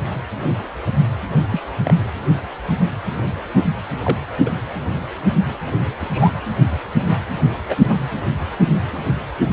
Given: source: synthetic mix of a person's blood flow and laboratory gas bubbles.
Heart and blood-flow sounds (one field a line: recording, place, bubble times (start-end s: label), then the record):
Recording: Doppler ultrasound of blood flow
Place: precordium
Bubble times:
1.52-1.63 s: bubbles
1.84-1.94 s: bubbles
4.04-4.19 s: bubbles
4.46-4.50 s: bubbles
6.00-6.32 s: bubbles
7.69-7.75 s: bubbles
7.88-8.02 s: bubbles
From the record:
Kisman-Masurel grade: 122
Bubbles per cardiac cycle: 1 to 2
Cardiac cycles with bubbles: 10 to 50%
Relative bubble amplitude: moderate (0.250 to 0.450)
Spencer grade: 2 (many but less than half of the cardiac periods contain bubble signals, singularly or in groups)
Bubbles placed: anywhere in the cardiac cycle